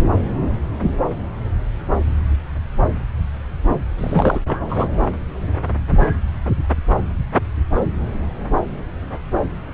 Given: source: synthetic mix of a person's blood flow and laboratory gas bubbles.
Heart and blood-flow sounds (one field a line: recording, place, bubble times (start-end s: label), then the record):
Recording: Doppler ultrasound of blood flow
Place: subclavian vein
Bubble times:
3.98-4.39 s: bubbles
4.47-4.89 s: bubbles
From the record:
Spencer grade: 2 (many but less than half of the cardiac periods contain bubble signals, singularly or in groups)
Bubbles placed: anywhere in the cardiac cycle